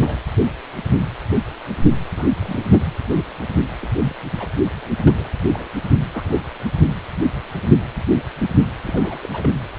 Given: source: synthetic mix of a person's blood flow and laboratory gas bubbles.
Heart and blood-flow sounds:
Doppler ultrasound of blood flow; precordium
0.00-0.19 s: bubbles
2.14-2.31 s: bubbles
2.35-2.94 s: bubbles
3.81-3.90 s: bubbles
3.99-4.16 s: bubbles
4.39-4.49 s: bubbles
4.98-5.29 s: bubbles
5.52-5.70 s: bubbles
6.13-6.40 s: bubbles
8.83-9.20 s: bubbles
9.22-9.27 s: bubbles
9.32-9.50 s: bubbles
From the record:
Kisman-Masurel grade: 221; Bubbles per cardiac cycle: several, 3 to 8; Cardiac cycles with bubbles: 10 to 50%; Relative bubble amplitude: barely perceptible (0.100 to 0.250); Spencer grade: 2 (many but less than half of the cardiac periods contain bubble signals, singularly or in groups); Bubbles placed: anywhere in the cardiac cycle

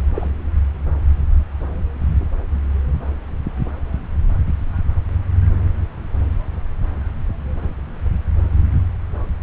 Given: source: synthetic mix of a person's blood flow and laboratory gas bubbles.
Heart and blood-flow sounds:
Doppler ultrasound of blood flow; subclavian vein
0.14-0.28 s: bubbles
From the record:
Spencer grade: 2 (many but less than half of the cardiac periods contain bubble signals, singularly or in groups); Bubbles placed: anywhere in the cardiac cycle

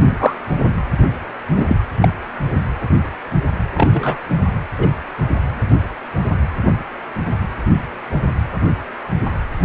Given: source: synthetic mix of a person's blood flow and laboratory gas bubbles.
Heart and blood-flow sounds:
Doppler ultrasound of blood flow; precordium
0.05-0.37 s: bubbles
1.53-1.66 s: bubbles
1.69-1.78 s: bubbles
2.01-2.09 s: bubbles
3.74-4.18 s: bubbles
4.78-4.88 s: bubbles
From the record:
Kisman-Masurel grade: 123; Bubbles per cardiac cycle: 1 to 2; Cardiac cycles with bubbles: 10 to 50%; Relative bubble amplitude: loud (0.450 to 0.775); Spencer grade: 2 (many but less than half of the cardiac periods contain bubble signals, singularly or in groups); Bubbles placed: anywhere in the cardiac cycle

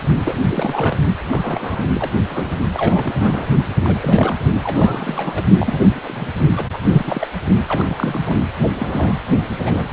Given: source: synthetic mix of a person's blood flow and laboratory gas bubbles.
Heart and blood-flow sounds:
Doppler ultrasound of blood flow; precordium
0.24-0.96 s: bubbles
1.30-1.89 s: bubbles
1.95-2.10 s: bubbles
2.29-2.55 s: bubbles
2.75-3.48 s: bubbles
3.82-3.98 s: bubbles
4.01-4.36 s: bubbles
4.63-5.44 s: bubbles
5.58-6.00 s: bubbles
6.03-6.31 s: bubbles
6.56-6.67 s: bubbles
6.72-6.77 s: bubbles
6.88-7.28 s: bubbles
7.66-8.42 s: bubbles
8.74-9.17 s: bubbles
9.56-9.88 s: bubbles
From the record:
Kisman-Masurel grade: 342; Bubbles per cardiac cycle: rolling drumbeat, 9 or more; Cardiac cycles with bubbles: 100%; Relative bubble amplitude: moderate (0.250 to 0.450); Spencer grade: 3 (all of the cardiac periods contain showers or single bubble signals, but not dominating or overriding the cardiac motion signals); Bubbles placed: only in the low amplitude regions of the cardiac cycle

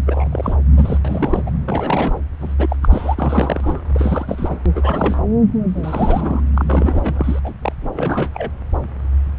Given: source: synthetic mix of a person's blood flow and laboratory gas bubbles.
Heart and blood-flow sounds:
Doppler ultrasound of blood flow; subclavian vein
0.06-0.56 s: bubbles
0.76-0.97 s: bubbles
1.04-1.42 s: bubbles
1.45-1.50 s: bubbles
1.65-2.17 s: bubbles
2.41-2.54 s: bubbles
2.58-2.76 s: bubbles
2.83-3.16 s: bubbles
3.18-3.81 s: bubbles
3.93-4.57 s: bubbles
4.75-5.21 s: bubbles
5.68-6.42 s: bubbles
6.55-7.39 s: bubbles
7.43-7.53 s: bubbles
7.61-7.72 s: bubbles
7.81-7.90 s: bubbles
7.92-8.31 s: bubbles
8.34-8.50 s: bubbles
From the record:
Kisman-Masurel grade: 332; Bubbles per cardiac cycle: rolling drumbeat, 9 or more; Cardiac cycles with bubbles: 50 to 99%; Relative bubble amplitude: moderate (0.250 to 0.450); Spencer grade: 3 (all of the cardiac periods contain showers or single bubble signals, but not dominating or overriding the cardiac motion signals); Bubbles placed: anywhere in the cardiac cycle

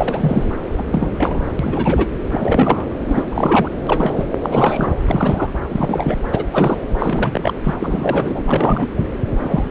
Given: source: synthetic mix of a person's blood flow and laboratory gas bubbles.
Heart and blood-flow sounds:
Doppler ultrasound of blood flow; subclavian vein
0.00-0.49 s: bubbles
0.68-1.45 s: bubbles
1.59-2.08 s: bubbles
2.31-2.91 s: bubbles
3.08-3.23 s: bubbles
3.31-3.69 s: bubbles
3.86-4.27 s: bubbles
4.42-4.93 s: bubbles
5.05-5.50 s: bubbles
5.69-6.18 s: bubbles
6.27-6.45 s: bubbles
6.52-6.77 s: bubbles
6.99-7.54 s: bubbles
7.64-7.75 s: bubbles
7.80-8.44 s: bubbles
8.46-8.88 s: bubbles
8.96-9.07 s: bubbles
9.42-9.70 s: bubbles
From the record:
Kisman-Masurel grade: 343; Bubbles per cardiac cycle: rolling drumbeat, 9 or more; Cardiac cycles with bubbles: 100%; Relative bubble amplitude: loud (0.450 to 0.775); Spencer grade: 3 (all of the cardiac periods contain showers or single bubble signals, but not dominating or overriding the cardiac motion signals); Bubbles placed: anywhere in the cardiac cycle

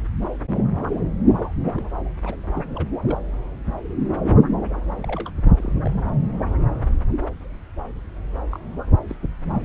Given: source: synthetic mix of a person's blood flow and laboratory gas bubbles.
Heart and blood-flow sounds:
Doppler ultrasound of blood flow; subclavian vein
1.76-1.84 s: bubbles
2.25-2.37 s: bubbles
2.54-2.64 s: bubbles
2.76-2.88 s: bubbles
3.03-3.19 s: bubbles
4.92-5.31 s: bubbles
5.44-5.52 s: bubbles
5.57-5.71 s: bubbles
5.81-5.99 s: bubbles
8.52-8.59 s: bubbles
9.07-9.16 s: bubbles
9.51-9.58 s: bubbles
From the record:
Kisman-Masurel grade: 221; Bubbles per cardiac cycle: several, 3 to 8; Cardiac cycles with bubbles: 10 to 50%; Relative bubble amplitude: barely perceptible (0.100 to 0.250); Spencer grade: 2 (many but less than half of the cardiac periods contain bubble signals, singularly or in groups); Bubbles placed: anywhere in the cardiac cycle

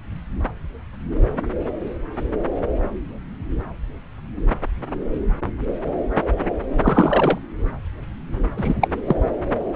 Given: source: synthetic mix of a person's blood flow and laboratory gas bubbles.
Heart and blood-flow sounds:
Doppler ultrasound of blood flow; subclavian vein
6.82-7.38 s: bubbles
8.56-8.75 s: bubbles
8.81-8.88 s: bubbles
9.06-9.15 s: bubbles
From the record:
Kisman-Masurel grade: 223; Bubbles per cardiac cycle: several, 3 to 8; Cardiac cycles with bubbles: 10 to 50%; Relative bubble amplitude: loud (0.450 to 0.775); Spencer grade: 2 (many but less than half of the cardiac periods contain bubble signals, singularly or in groups); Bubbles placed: anywhere in the cardiac cycle

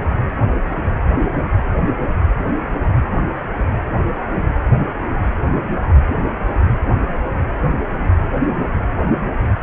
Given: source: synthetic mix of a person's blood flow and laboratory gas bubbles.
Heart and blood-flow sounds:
Doppler ultrasound of blood flow; precordium
4.24-4.43 s: bubbles
From the record:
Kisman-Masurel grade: 111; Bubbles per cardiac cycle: 1 to 2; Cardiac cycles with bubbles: 1 to 10%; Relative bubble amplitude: barely perceptible (0.100 to 0.250); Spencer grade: 1 (occasional bubble signal discernible with the cardiac motion signal, with majority of cardiac periods free of bubbles); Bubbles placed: anywhere in the cardiac cycle

